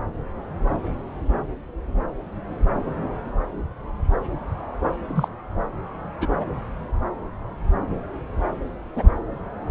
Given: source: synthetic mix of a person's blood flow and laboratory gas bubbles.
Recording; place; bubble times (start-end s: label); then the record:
Doppler ultrasound of blood flow; subclavian vein
5.06-5.28 s: bubbles
6.21-6.27 s: bubbles
6.41-6.45 s: bubbles
8.96-9.10 s: bubbles
From the record:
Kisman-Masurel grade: 122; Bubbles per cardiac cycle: 1 to 2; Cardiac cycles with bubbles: 10 to 50%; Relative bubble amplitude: moderate (0.250 to 0.450); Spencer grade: 2 (many but less than half of the cardiac periods contain bubble signals, singularly or in groups); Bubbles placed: anywhere in the cardiac cycle